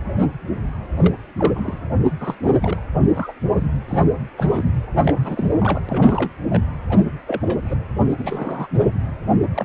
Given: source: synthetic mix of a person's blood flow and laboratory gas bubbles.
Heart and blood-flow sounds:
Doppler ultrasound of blood flow; precordium
0.96-1.15 s: bubbles
1.37-1.78 s: bubbles
2.20-2.34 s: bubbles
2.43-2.50 s: bubbles
2.62-2.82 s: bubbles
2.94-2.99 s: bubbles
3.13-3.33 s: bubbles
3.54-3.67 s: bubbles
3.88-4.04 s: bubbles
4.36-4.64 s: bubbles
5.01-5.48 s: bubbles
5.52-5.83 s: bubbles
5.88-6.31 s: bubbles
6.50-6.62 s: bubbles
6.89-7.04 s: bubbles
7.26-7.80 s: bubbles
8.09-8.16 s: bubbles
8.18-8.68 s: bubbles
8.75-8.82 s: bubbles
9.54-9.65 s: bubbles
From the record:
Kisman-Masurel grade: 242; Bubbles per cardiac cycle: several, 3 to 8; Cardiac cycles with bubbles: 100%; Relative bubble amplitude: moderate (0.250 to 0.450); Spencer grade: 3 (all of the cardiac periods contain showers or single bubble signals, but not dominating or overriding the cardiac motion signals); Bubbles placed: anywhere in the cardiac cycle

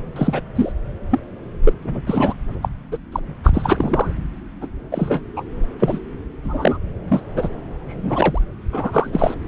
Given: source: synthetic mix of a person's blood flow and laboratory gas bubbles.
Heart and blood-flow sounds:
Doppler ultrasound of blood flow; subclavian vein
0.15-0.40 s: bubbles
0.55-0.72 s: bubbles
1.11-1.20 s: bubbles
1.64-1.73 s: bubbles
1.83-2.00 s: bubbles
2.07-2.33 s: bubbles
2.62-2.69 s: bubbles
2.92-2.98 s: bubbles
3.12-3.20 s: bubbles
3.44-4.14 s: bubbles
4.61-4.67 s: bubbles
4.91-5.21 s: bubbles
5.36-5.43 s: bubbles
5.79-5.99 s: bubbles
6.44-6.78 s: bubbles
7.08-7.21 s: bubbles
7.35-7.49 s: bubbles
7.88-8.41 s: bubbles
8.72-9.10 s: bubbles
9.12-9.35 s: bubbles
From the record:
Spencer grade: 3 (all of the cardiac periods contain showers or single bubble signals, but not dominating or overriding the cardiac motion signals); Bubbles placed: anywhere in the cardiac cycle

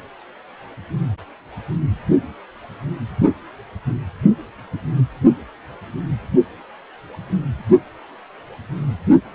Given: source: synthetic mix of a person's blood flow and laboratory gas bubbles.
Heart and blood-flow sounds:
Doppler ultrasound of blood flow; precordium
no bubbles
From the record:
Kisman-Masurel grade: 000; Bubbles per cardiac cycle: 0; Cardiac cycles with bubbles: 0%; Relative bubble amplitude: no bubbles discernible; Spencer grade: 0 (complete lack of bubble signals)

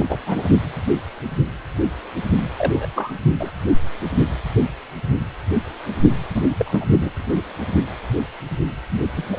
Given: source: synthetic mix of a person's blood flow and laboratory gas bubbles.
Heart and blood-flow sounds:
Doppler ultrasound of blood flow; precordium
0.00-0.06 s: bubbles
0.08-0.17 s: bubbles
0.26-0.48 s: bubbles
2.58-2.86 s: bubbles
2.95-3.12 s: bubbles
3.39-3.51 s: bubbles
6.34-6.55 s: bubbles
6.58-6.85 s: bubbles
6.89-7.10 s: bubbles
8.91-8.98 s: bubbles
9.14-9.30 s: bubbles
9.32-9.39 s: bubbles
From the record:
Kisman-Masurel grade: 222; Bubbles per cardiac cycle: several, 3 to 8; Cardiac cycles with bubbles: 10 to 50%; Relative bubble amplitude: moderate (0.250 to 0.450); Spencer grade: 2 (many but less than half of the cardiac periods contain bubble signals, singularly or in groups); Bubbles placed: anywhere in the cardiac cycle

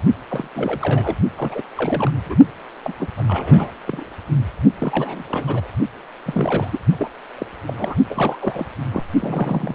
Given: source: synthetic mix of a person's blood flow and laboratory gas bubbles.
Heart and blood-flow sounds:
Doppler ultrasound of blood flow; precordium
0.28-0.48 s: bubbles
0.55-1.17 s: bubbles
1.36-1.61 s: bubbles
1.77-2.10 s: bubbles
2.25-2.35 s: bubbles
2.83-2.93 s: bubbles
2.98-3.07 s: bubbles
3.17-3.23 s: bubbles
3.27-3.71 s: bubbles
3.87-4.08 s: bubbles
4.79-5.23 s: bubbles
5.28-5.67 s: bubbles
6.26-6.68 s: bubbles
6.71-6.80 s: bubbles
6.98-7.10 s: bubbles
7.38-7.46 s: bubbles
7.67-7.95 s: bubbles
8.10-8.37 s: bubbles
8.41-8.66 s: bubbles
8.91-9.04 s: bubbles
9.20-9.75 s: bubbles
From the record:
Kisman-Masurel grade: 342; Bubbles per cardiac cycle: rolling drumbeat, 9 or more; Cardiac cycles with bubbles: 100%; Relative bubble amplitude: moderate (0.250 to 0.450); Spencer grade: 3 (all of the cardiac periods contain showers or single bubble signals, but not dominating or overriding the cardiac motion signals); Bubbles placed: only in the low amplitude regions of the cardiac cycle

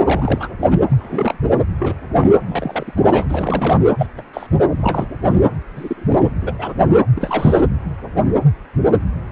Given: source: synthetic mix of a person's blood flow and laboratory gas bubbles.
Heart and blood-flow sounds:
Doppler ultrasound of blood flow; precordium
0.04-0.49 s: bubbles
0.59-0.78 s: bubbles
0.90-1.39 s: bubbles
1.79-1.94 s: bubbles
2.19-2.33 s: bubbles
2.46-2.94 s: bubbles
3.00-3.25 s: bubbles
3.28-3.78 s: bubbles
3.98-4.07 s: bubbles
4.17-4.23 s: bubbles
4.33-4.47 s: bubbles
4.79-5.07 s: bubbles
5.30-5.40 s: bubbles
5.75-6.33 s: bubbles
6.42-6.53 s: bubbles
6.58-6.74 s: bubbles
7.15-7.62 s: bubbles
From the record:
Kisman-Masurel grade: 232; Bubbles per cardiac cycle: several, 3 to 8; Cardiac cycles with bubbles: 50 to 99%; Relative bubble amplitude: moderate (0.250 to 0.450); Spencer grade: 3 (all of the cardiac periods contain showers or single bubble signals, but not dominating or overriding the cardiac motion signals); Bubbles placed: anywhere in the cardiac cycle

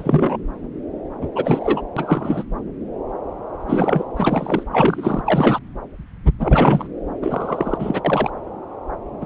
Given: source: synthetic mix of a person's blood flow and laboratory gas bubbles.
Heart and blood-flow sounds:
Doppler ultrasound of blood flow; subclavian vein
0.00-0.37 s: bubbles
1.21-1.27 s: bubbles
1.35-1.81 s: bubbles
1.96-2.44 s: bubbles
3.67-4.04 s: bubbles
4.16-4.63 s: bubbles
4.72-5.21 s: bubbles
5.25-5.59 s: bubbles
6.39-6.87 s: bubbles
7.21-8.01 s: bubbles
8.04-8.30 s: bubbles
9.21-9.26 s: bubbles
From the record:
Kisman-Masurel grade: 233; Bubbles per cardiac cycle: several, 3 to 8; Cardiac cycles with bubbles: 50 to 99%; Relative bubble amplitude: loud (0.450 to 0.775); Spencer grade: 3 (all of the cardiac periods contain showers or single bubble signals, but not dominating or overriding the cardiac motion signals); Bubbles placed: anywhere in the cardiac cycle

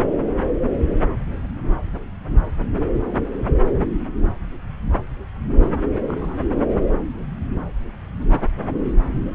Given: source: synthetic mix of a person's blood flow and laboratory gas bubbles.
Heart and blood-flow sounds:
Doppler ultrasound of blood flow; subclavian vein
6.08-6.37 s: bubbles
From the record:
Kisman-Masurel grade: 111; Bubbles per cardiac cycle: 1 to 2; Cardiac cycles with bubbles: 1 to 10%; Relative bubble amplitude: barely perceptible (0.100 to 0.250); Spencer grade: 1 (occasional bubble signal discernible with the cardiac motion signal, with majority of cardiac periods free of bubbles); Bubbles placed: anywhere in the cardiac cycle

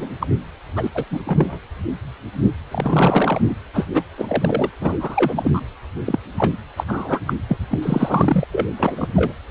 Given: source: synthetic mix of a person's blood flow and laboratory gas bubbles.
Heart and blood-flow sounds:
Doppler ultrasound of blood flow; precordium
0.00-0.10 s: bubbles
0.20-0.27 s: bubbles
0.76-0.90 s: bubbles
0.94-1.04 s: bubbles
1.10-1.20 s: bubbles
1.25-1.59 s: bubbles
2.71-3.41 s: bubbles
3.48-3.55 s: bubbles
3.73-3.86 s: bubbles
3.93-4.03 s: bubbles
4.17-4.70 s: bubbles
4.81-5.61 s: bubbles
6.06-6.19 s: bubbles
6.38-6.54 s: bubbles
6.77-6.85 s: bubbles
6.88-7.21 s: bubbles
7.27-7.33 s: bubbles
7.49-7.58 s: bubbles
7.70-7.79 s: bubbles
7.82-8.45 s: bubbles
8.52-8.67 s: bubbles
8.77-9.08 s: bubbles
9.16-9.33 s: bubbles
From the record:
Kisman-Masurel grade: 233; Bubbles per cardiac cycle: several, 3 to 8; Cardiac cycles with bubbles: 50 to 99%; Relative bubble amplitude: loud (0.450 to 0.775); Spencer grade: 3 (all of the cardiac periods contain showers or single bubble signals, but not dominating or overriding the cardiac motion signals); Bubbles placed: anywhere in the cardiac cycle

